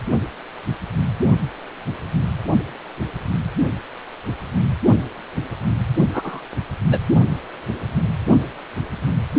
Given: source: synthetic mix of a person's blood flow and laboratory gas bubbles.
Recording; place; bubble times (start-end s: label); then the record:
Doppler ultrasound of blood flow; precordium
6.13-6.42 s: bubbles
6.90-6.97 s: bubbles
From the record:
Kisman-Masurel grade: 113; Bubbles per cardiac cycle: 1 to 2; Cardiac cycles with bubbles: 1 to 10%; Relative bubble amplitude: loud (0.450 to 0.775); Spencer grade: 1 (occasional bubble signal discernible with the cardiac motion signal, with majority of cardiac periods free of bubbles); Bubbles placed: only in the low amplitude regions of the cardiac cycle